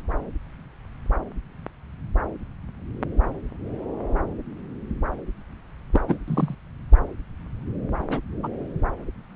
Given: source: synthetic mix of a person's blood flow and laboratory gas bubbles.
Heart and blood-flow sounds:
Doppler ultrasound of blood flow; subclavian vein
5.92-6.01 s: bubbles
6.08-6.18 s: bubbles
6.27-6.55 s: bubbles
8.10-8.20 s: bubbles
8.43-8.48 s: bubbles
From the record:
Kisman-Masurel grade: 122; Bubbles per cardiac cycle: 1 to 2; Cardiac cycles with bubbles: 10 to 50%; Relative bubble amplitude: moderate (0.250 to 0.450); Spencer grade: 2 (many but less than half of the cardiac periods contain bubble signals, singularly or in groups); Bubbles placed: anywhere in the cardiac cycle

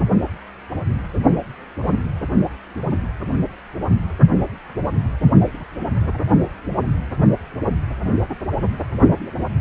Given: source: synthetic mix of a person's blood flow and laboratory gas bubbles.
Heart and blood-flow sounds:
Doppler ultrasound of blood flow; precordium
no bubbles
From the record:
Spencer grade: 0 (complete lack of bubble signals)

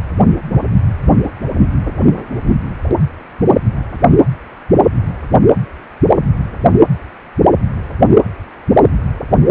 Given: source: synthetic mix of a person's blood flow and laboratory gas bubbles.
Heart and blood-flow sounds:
Doppler ultrasound of blood flow; precordium
no bubbles
From the record:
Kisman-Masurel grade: 000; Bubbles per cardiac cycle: 0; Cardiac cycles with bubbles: 0%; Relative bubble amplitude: no bubbles discernible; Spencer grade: 0 (complete lack of bubble signals)

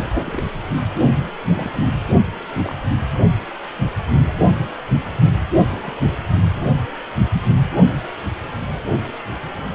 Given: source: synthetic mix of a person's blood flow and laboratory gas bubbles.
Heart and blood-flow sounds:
Doppler ultrasound of blood flow; precordium
0.00-0.07 s: bubbles
0.26-0.45 s: bubbles
0.77-0.82 s: bubbles
1.45-1.93 s: bubbles
2.56-2.75 s: bubbles
5.71-6.17 s: bubbles
6.33-6.61 s: bubbles
From the record:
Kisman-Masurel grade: 221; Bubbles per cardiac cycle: several, 3 to 8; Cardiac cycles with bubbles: 10 to 50%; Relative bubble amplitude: barely perceptible (0.100 to 0.250); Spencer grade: 2 (many but less than half of the cardiac periods contain bubble signals, singularly or in groups); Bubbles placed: only in the low amplitude regions of the cardiac cycle

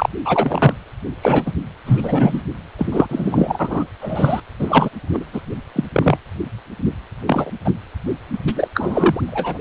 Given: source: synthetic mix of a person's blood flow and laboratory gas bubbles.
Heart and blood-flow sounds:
Doppler ultrasound of blood flow; precordium
0.00-0.09 s: bubbles
0.25-0.73 s: bubbles
1.21-1.53 s: bubbles
1.85-2.42 s: bubbles
2.78-3.84 s: bubbles
4.01-4.40 s: bubbles
4.59-4.89 s: bubbles
5.12-5.25 s: bubbles
5.33-5.41 s: bubbles
5.75-5.84 s: bubbles
5.93-6.17 s: bubbles
7.27-7.50 s: bubbles
7.65-7.71 s: bubbles
8.32-8.38 s: bubbles
8.47-8.53 s: bubbles
8.55-8.68 s: bubbles
8.74-9.21 s: bubbles
9.29-9.58 s: bubbles
From the record:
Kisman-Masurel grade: 233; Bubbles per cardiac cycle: several, 3 to 8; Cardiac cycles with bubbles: 50 to 99%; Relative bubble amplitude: loud (0.450 to 0.775); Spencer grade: 3 (all of the cardiac periods contain showers or single bubble signals, but not dominating or overriding the cardiac motion signals); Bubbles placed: anywhere in the cardiac cycle

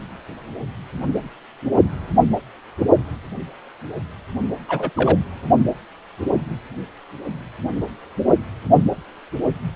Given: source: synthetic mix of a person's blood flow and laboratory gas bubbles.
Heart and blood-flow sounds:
Doppler ultrasound of blood flow; precordium
4.68-4.90 s: bubbles
4.96-5.18 s: bubbles
From the record:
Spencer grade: 1 (occasional bubble signal discernible with the cardiac motion signal, with majority of cardiac periods free of bubbles); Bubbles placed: only in the low amplitude regions of the cardiac cycle

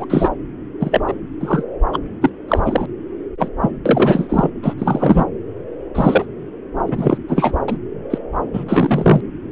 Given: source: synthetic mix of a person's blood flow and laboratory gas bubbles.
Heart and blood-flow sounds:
Doppler ultrasound of blood flow; subclavian vein
0.00-0.05 s: bubbles
0.09-0.31 s: bubbles
0.79-1.01 s: bubbles
1.07-1.14 s: bubbles
1.40-1.64 s: bubbles
1.93-1.98 s: bubbles
2.21-2.30 s: bubbles
2.48-2.86 s: bubbles
3.39-3.50 s: bubbles
3.60-3.71 s: bubbles
3.85-4.51 s: bubbles
4.62-4.74 s: bubbles
4.78-5.24 s: bubbles
5.95-6.26 s: bubbles
6.87-7.18 s: bubbles
7.28-7.53 s: bubbles
7.68-7.78 s: bubbles
8.10-8.18 s: bubbles
8.53-8.63 s: bubbles
8.67-9.21 s: bubbles
From the record:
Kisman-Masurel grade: 243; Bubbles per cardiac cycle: several, 3 to 8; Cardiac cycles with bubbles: 100%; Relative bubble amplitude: loud (0.450 to 0.775); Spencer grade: 3 (all of the cardiac periods contain showers or single bubble signals, but not dominating or overriding the cardiac motion signals); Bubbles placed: anywhere in the cardiac cycle

